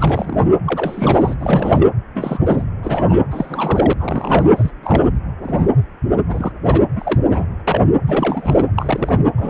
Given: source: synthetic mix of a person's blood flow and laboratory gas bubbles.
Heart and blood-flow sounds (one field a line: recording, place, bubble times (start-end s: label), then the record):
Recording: Doppler ultrasound of blood flow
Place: precordium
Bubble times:
0.00-0.47 s: bubbles
0.66-1.34 s: bubbles
1.39-1.89 s: bubbles
2.14-2.42 s: bubbles
2.46-2.62 s: bubbles
2.83-3.23 s: bubbles
3.31-3.93 s: bubbles
4.00-4.50 s: bubbles
4.56-4.71 s: bubbles
4.83-5.08 s: bubbles
5.43-5.71 s: bubbles
6.28-6.52 s: bubbles
6.63-6.81 s: bubbles
6.95-7.18 s: bubbles
7.30-7.45 s: bubbles
7.67-7.82 s: bubbles
8.07-8.70 s: bubbles
8.77-9.25 s: bubbles
9.37-9.50 s: bubbles
From the record:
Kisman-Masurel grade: 232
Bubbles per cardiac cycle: several, 3 to 8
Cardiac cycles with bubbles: 50 to 99%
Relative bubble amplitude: moderate (0.250 to 0.450)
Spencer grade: 3 (all of the cardiac periods contain showers or single bubble signals, but not dominating or overriding the cardiac motion signals)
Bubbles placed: anywhere in the cardiac cycle